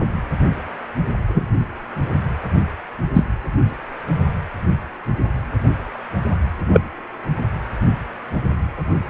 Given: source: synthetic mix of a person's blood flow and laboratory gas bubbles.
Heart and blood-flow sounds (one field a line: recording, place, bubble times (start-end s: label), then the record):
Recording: Doppler ultrasound of blood flow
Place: precordium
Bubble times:
1.27-1.46 s: bubbles
3.14-3.25 s: bubbles
6.72-6.81 s: bubbles
From the record:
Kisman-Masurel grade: 123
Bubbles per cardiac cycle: 1 to 2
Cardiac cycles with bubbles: 10 to 50%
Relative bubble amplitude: loud (0.450 to 0.775)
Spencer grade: 2 (many but less than half of the cardiac periods contain bubble signals, singularly or in groups)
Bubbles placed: anywhere in the cardiac cycle